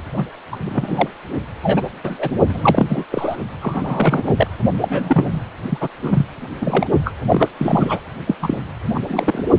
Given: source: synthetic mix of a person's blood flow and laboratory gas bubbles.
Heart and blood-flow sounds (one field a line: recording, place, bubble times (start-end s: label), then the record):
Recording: Doppler ultrasound of blood flow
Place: precordium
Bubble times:
0.16-0.24 s: bubbles
0.51-0.57 s: bubbles
0.64-1.08 s: bubbles
1.62-1.81 s: bubbles
2.04-2.35 s: bubbles
2.49-3.04 s: bubbles
3.10-3.37 s: bubbles
3.62-4.34 s: bubbles
4.37-4.47 s: bubbles
4.80-5.42 s: bubbles
5.69-5.78 s: bubbles
5.80-5.88 s: bubbles
6.01-6.26 s: bubbles
6.61-6.87 s: bubbles
7.04-7.13 s: bubbles
7.29-7.48 s: bubbles
7.58-8.04 s: bubbles
8.27-8.36 s: bubbles
8.39-8.57 s: bubbles
8.94-9.00 s: bubbles
9.06-9.45 s: bubbles
From the record:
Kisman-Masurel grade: 243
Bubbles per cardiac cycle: several, 3 to 8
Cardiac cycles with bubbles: 100%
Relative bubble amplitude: loud (0.450 to 0.775)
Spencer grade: 3 (all of the cardiac periods contain showers or single bubble signals, but not dominating or overriding the cardiac motion signals)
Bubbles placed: only in the low amplitude regions of the cardiac cycle